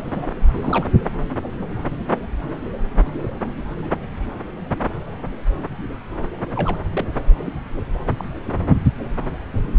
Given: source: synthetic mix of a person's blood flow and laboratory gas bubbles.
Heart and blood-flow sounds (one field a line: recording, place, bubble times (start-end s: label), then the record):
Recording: Doppler ultrasound of blood flow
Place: subclavian vein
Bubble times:
0.04-0.32 s: bubbles
0.63-0.85 s: bubbles
6.56-6.76 s: bubbles
6.92-7.06 s: bubbles
8.18-8.24 s: bubbles
8.46-8.52 s: bubbles
From the record:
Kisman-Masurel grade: 122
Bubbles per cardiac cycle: 1 to 2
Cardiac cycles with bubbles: 10 to 50%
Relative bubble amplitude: moderate (0.250 to 0.450)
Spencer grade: 2 (many but less than half of the cardiac periods contain bubble signals, singularly or in groups)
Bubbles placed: anywhere in the cardiac cycle